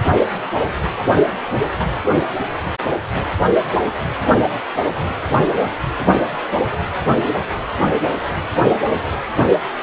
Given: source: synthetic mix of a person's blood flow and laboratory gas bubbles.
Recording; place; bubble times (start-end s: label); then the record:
Doppler ultrasound of blood flow; precordium
no bubbles
From the record:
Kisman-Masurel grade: 000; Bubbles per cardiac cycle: 0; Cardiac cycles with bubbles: 0%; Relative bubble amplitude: no bubbles discernible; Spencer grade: 0 (complete lack of bubble signals)